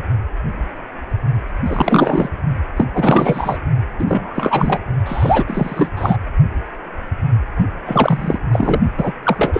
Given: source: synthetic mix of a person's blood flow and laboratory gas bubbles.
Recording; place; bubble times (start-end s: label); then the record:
Doppler ultrasound of blood flow; precordium
1.66-2.29 s: bubbles
2.76-2.85 s: bubbles
2.94-3.58 s: bubbles
3.99-4.79 s: bubbles
5.05-5.45 s: bubbles
5.47-5.90 s: bubbles
5.96-6.17 s: bubbles
7.86-8.38 s: bubbles
8.52-8.79 s: bubbles
8.97-9.12 s: bubbles
9.23-9.60 s: bubbles
From the record:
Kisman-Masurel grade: 333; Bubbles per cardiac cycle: rolling drumbeat, 9 or more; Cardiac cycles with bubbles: 50 to 99%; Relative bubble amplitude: loud (0.450 to 0.775); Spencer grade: 3 (all of the cardiac periods contain showers or single bubble signals, but not dominating or overriding the cardiac motion signals); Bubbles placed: only in the low amplitude regions of the cardiac cycle